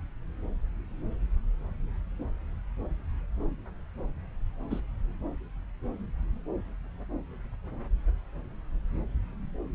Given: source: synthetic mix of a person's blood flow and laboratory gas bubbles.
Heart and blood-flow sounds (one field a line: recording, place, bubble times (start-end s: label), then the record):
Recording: Doppler ultrasound of blood flow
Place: subclavian vein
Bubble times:
4.71-4.80 s: bubbles
From the record:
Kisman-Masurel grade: 111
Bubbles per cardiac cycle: 1 to 2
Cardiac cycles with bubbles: 1 to 10%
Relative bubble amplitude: barely perceptible (0.100 to 0.250)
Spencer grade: 1 (occasional bubble signal discernible with the cardiac motion signal, with majority of cardiac periods free of bubbles)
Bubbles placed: anywhere in the cardiac cycle